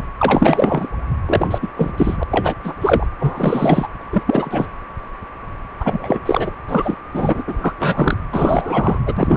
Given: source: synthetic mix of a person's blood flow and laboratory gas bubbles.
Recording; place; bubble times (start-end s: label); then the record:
Doppler ultrasound of blood flow; precordium
0.19-0.88 s: bubbles
1.25-1.48 s: bubbles
1.50-1.58 s: bubbles
1.62-1.68 s: bubbles
1.76-1.92 s: bubbles
1.97-2.23 s: bubbles
2.30-2.55 s: bubbles
2.63-2.73 s: bubbles
2.80-3.06 s: bubbles
3.19-3.88 s: bubbles
4.01-4.04 s: bubbles
4.12-4.22 s: bubbles
4.26-4.70 s: bubbles
5.79-6.20 s: bubbles
6.25-6.52 s: bubbles
6.68-6.97 s: bubbles
7.12-7.43 s: bubbles
7.47-7.73 s: bubbles
7.78-8.17 s: bubbles
8.31-8.99 s: bubbles
9.06-9.14 s: bubbles
9.17-9.37 s: bubbles
From the record:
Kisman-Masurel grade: 333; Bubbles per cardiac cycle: rolling drumbeat, 9 or more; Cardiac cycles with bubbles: 50 to 99%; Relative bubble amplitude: loud (0.450 to 0.775); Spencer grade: 3 (all of the cardiac periods contain showers or single bubble signals, but not dominating or overriding the cardiac motion signals); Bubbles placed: anywhere in the cardiac cycle